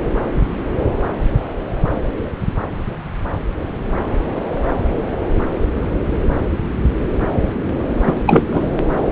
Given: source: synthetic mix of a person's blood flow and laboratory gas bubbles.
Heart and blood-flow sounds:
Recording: Doppler ultrasound of blood flow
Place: subclavian vein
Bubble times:
8.06-8.21 s: bubbles
8.26-8.45 s: bubbles
8.51-8.70 s: bubbles
From the record:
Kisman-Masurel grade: 213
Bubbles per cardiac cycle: several, 3 to 8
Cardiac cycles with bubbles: 1 to 10%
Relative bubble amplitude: loud (0.450 to 0.775)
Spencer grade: 1 (occasional bubble signal discernible with the cardiac motion signal, with majority of cardiac periods free of bubbles)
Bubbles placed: anywhere in the cardiac cycle

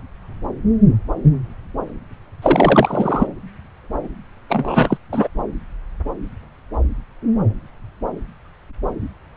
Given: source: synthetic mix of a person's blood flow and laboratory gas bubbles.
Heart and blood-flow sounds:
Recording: Doppler ultrasound of blood flow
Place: subclavian vein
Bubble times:
2.42-3.27 s: bubbles
4.49-4.97 s: bubbles
5.12-5.29 s: bubbles
From the record:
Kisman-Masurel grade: 223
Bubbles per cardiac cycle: several, 3 to 8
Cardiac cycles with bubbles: 10 to 50%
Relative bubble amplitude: loud (0.450 to 0.775)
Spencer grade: 2 (many but less than half of the cardiac periods contain bubble signals, singularly or in groups)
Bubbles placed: anywhere in the cardiac cycle

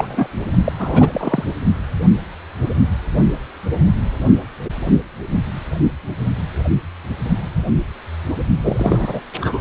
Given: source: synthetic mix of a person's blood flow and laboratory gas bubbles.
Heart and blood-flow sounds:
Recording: Doppler ultrasound of blood flow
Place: precordium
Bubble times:
0.00-0.28 s: bubbles
0.64-0.72 s: bubbles
0.77-1.44 s: bubbles
8.63-9.21 s: bubbles
9.41-9.61 s: bubbles
From the record:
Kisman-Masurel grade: 222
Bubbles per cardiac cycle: several, 3 to 8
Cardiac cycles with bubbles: 10 to 50%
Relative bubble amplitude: moderate (0.250 to 0.450)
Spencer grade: 2 (many but less than half of the cardiac periods contain bubble signals, singularly or in groups)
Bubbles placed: only in the low amplitude regions of the cardiac cycle

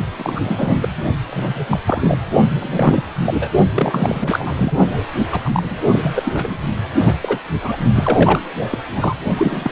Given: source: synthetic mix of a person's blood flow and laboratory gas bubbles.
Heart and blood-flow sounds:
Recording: Doppler ultrasound of blood flow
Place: precordium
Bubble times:
0.17-0.89 s: bubbles
1.29-1.67 s: bubbles
1.69-1.79 s: bubbles
1.86-2.18 s: bubbles
2.50-2.55 s: bubbles
2.58-3.05 s: bubbles
3.25-3.52 s: bubbles
3.74-4.54 s: bubbles
4.57-4.79 s: bubbles
5.32-5.81 s: bubbles
5.91-6.58 s: bubbles
6.97-7.16 s: bubbles
7.21-7.39 s: bubbles
7.62-7.77 s: bubbles
7.95-8.40 s: bubbles
8.71-8.79 s: bubbles
8.96-9.15 s: bubbles
9.37-9.72 s: bubbles
From the record:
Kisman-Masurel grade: 342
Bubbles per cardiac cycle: rolling drumbeat, 9 or more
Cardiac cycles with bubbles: 100%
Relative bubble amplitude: moderate (0.250 to 0.450)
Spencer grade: 3 (all of the cardiac periods contain showers or single bubble signals, but not dominating or overriding the cardiac motion signals)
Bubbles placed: only in the low amplitude regions of the cardiac cycle

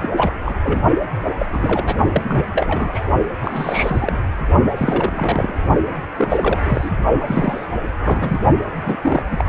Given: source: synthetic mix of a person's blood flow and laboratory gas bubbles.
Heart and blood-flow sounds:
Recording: Doppler ultrasound of blood flow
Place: precordium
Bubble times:
0.01-0.09 s: bubbles
0.17-0.32 s: bubbles
0.44-0.54 s: bubbles
0.64-0.82 s: bubbles
1.39-1.46 s: bubbles
1.52-1.95 s: bubbles
2.12-2.44 s: bubbles
2.53-3.04 s: bubbles
3.41-4.19 s: bubbles
4.76-5.54 s: bubbles
6.17-6.90 s: bubbles
7.19-7.66 s: bubbles
8.04-8.40 s: bubbles
8.86-8.96 s: bubbles
9.01-9.22 s: bubbles
9.30-9.48 s: bubbles
From the record:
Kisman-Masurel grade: 342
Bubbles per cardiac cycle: rolling drumbeat, 9 or more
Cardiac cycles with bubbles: 100%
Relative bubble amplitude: moderate (0.250 to 0.450)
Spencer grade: 3 (all of the cardiac periods contain showers or single bubble signals, but not dominating or overriding the cardiac motion signals)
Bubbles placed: only in the low amplitude regions of the cardiac cycle

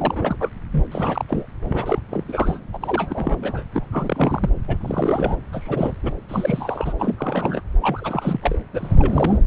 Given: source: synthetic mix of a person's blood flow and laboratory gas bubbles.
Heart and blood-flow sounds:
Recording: Doppler ultrasound of blood flow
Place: subclavian vein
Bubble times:
0.00-0.36 s: bubbles
0.39-0.50 s: bubbles
0.72-0.85 s: bubbles
0.92-1.25 s: bubbles
1.28-1.46 s: bubbles
1.70-1.99 s: bubbles
2.10-2.24 s: bubbles
2.28-2.60 s: bubbles
2.72-2.77 s: bubbles
2.80-3.63 s: bubbles
3.73-3.86 s: bubbles
3.91-4.50 s: bubbles
4.68-4.77 s: bubbles
4.81-5.36 s: bubbles
5.52-5.93 s: bubbles
6.03-6.12 s: bubbles
6.29-6.93 s: bubbles
6.99-7.62 s: bubbles
7.81-8.63 s: bubbles
8.73-9.38 s: bubbles
9.45-9.47 s: bubbles
From the record:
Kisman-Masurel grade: 342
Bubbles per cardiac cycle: rolling drumbeat, 9 or more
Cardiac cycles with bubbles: 100%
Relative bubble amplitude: moderate (0.250 to 0.450)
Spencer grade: 3 (all of the cardiac periods contain showers or single bubble signals, but not dominating or overriding the cardiac motion signals)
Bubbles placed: anywhere in the cardiac cycle

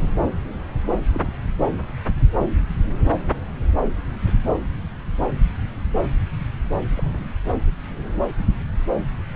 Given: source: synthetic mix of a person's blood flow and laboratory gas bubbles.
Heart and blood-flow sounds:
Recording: Doppler ultrasound of blood flow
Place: subclavian vein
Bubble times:
0.00-0.08 s: bubbles
1.12-1.32 s: bubbles
4.25-4.33 s: bubbles
6.96-7.25 s: bubbles
From the record:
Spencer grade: 2 (many but less than half of the cardiac periods contain bubble signals, singularly or in groups)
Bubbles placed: anywhere in the cardiac cycle

